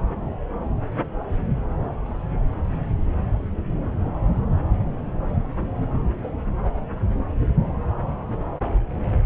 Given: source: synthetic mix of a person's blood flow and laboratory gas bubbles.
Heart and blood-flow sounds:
Doppler ultrasound of blood flow; subclavian vein
no bubbles
From the record:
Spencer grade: 0 (complete lack of bubble signals)

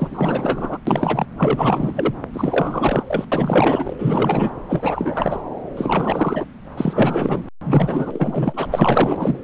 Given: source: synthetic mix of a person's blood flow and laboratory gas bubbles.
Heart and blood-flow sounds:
Doppler ultrasound of blood flow; subclavian vein
0.00-0.78 s: bubbles
0.86-1.25 s: bubbles
1.38-2.13 s: bubbles
2.33-3.04 s: bubbles
3.07-3.25 s: bubbles
3.32-3.94 s: bubbles
3.98-4.51 s: bubbles
4.68-5.42 s: bubbles
5.76-6.46 s: bubbles
6.77-7.43 s: bubbles
7.63-8.67 s: bubbles
8.73-9.37 s: bubbles
From the record:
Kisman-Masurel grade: 444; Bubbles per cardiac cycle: continuous sound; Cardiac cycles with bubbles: 100%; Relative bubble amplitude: maximal (0.775 to 0.999); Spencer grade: 4 (maximum detectable bubble signal sounding continuously throughout systole and diastole of every cardiac period, and overriding the amplitude of the normal cardiac signals); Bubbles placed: anywhere in the cardiac cycle

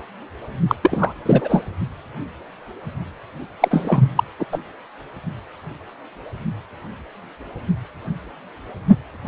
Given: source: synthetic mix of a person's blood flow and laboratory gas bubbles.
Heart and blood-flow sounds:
Doppler ultrasound of blood flow; precordium
0.68-0.75 s: bubbles
0.82-1.14 s: bubbles
1.26-1.64 s: bubbles
3.61-4.10 s: bubbles
4.15-4.23 s: bubbles
4.39-4.45 s: bubbles
4.52-4.58 s: bubbles
From the record:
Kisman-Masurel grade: 223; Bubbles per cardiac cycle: several, 3 to 8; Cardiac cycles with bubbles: 10 to 50%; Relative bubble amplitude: loud (0.450 to 0.775); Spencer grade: 2 (many but less than half of the cardiac periods contain bubble signals, singularly or in groups); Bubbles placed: only in the low amplitude regions of the cardiac cycle

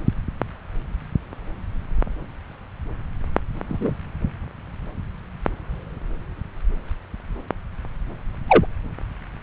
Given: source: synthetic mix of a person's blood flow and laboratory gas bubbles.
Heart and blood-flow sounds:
Doppler ultrasound of blood flow; subclavian vein
3.68-3.92 s: bubbles
8.48-8.66 s: bubbles
From the record:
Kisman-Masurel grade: 123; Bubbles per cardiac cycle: 1 to 2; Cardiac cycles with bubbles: 10 to 50%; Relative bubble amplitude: loud (0.450 to 0.775); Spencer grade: 2 (many but less than half of the cardiac periods contain bubble signals, singularly or in groups); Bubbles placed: anywhere in the cardiac cycle

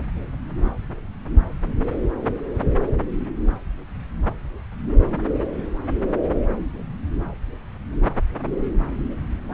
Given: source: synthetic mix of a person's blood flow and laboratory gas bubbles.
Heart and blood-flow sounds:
Doppler ultrasound of blood flow; subclavian vein
no bubbles
From the record:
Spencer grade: 0 (complete lack of bubble signals)

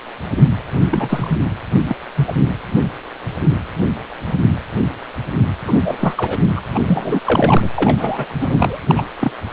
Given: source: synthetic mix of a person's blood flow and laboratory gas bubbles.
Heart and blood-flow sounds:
Doppler ultrasound of blood flow; precordium
0.77-1.40 s: bubbles
1.88-1.95 s: bubbles
2.15-2.33 s: bubbles
5.66-5.97 s: bubbles
6.00-6.14 s: bubbles
6.17-6.38 s: bubbles
6.55-6.62 s: bubbles
6.73-6.80 s: bubbles
6.88-7.19 s: bubbles
7.25-7.70 s: bubbles
7.75-8.25 s: bubbles
8.40-8.79 s: bubbles
8.88-9.03 s: bubbles
9.20-9.32 s: bubbles
From the record:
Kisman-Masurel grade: 233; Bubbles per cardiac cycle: several, 3 to 8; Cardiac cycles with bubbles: 50 to 99%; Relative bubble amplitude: loud (0.450 to 0.775); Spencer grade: 3 (all of the cardiac periods contain showers or single bubble signals, but not dominating or overriding the cardiac motion signals); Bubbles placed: anywhere in the cardiac cycle

